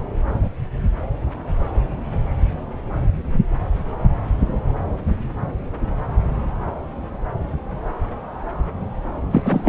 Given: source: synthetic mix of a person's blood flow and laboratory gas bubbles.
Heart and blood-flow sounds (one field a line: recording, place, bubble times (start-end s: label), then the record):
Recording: Doppler ultrasound of blood flow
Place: subclavian vein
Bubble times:
9.31-9.42 s: bubbles
9.45-9.69 s: bubbles
From the record:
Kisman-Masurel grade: 213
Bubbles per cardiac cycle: several, 3 to 8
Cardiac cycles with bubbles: 1 to 10%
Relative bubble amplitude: loud (0.450 to 0.775)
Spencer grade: 1 (occasional bubble signal discernible with the cardiac motion signal, with majority of cardiac periods free of bubbles)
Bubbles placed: anywhere in the cardiac cycle